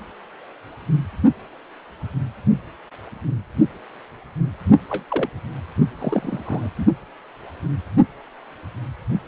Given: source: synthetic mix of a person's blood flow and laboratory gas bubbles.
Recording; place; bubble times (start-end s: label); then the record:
Doppler ultrasound of blood flow; precordium
4.90-5.04 s: bubbles
5.08-5.29 s: bubbles
5.97-6.70 s: bubbles
6.77-6.85 s: bubbles
From the record:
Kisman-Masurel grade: 221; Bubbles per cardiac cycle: several, 3 to 8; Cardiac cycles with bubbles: 10 to 50%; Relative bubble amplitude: barely perceptible (0.100 to 0.250); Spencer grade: 2 (many but less than half of the cardiac periods contain bubble signals, singularly or in groups); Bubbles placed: only in the low amplitude regions of the cardiac cycle